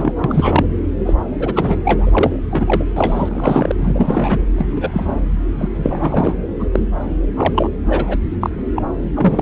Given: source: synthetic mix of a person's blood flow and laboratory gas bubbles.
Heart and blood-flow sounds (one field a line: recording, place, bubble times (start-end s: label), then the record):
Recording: Doppler ultrasound of blood flow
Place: subclavian vein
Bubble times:
0.00-0.12 s: bubbles
0.24-0.67 s: bubbles
1.05-1.14 s: bubbles
1.39-1.80 s: bubbles
1.84-2.39 s: bubbles
2.50-2.86 s: bubbles
2.96-3.71 s: bubbles
3.79-4.38 s: bubbles
4.55-4.67 s: bubbles
4.71-5.20 s: bubbles
5.58-5.68 s: bubbles
5.76-6.34 s: bubbles
6.59-6.67 s: bubbles
6.73-6.79 s: bubbles
7.36-7.69 s: bubbles
7.88-8.17 s: bubbles
8.40-8.50 s: bubbles
8.75-8.82 s: bubbles
9.15-9.42 s: bubbles
From the record:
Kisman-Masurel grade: 243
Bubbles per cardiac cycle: several, 3 to 8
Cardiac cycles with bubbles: 100%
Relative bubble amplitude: loud (0.450 to 0.775)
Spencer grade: 3 (all of the cardiac periods contain showers or single bubble signals, but not dominating or overriding the cardiac motion signals)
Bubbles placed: anywhere in the cardiac cycle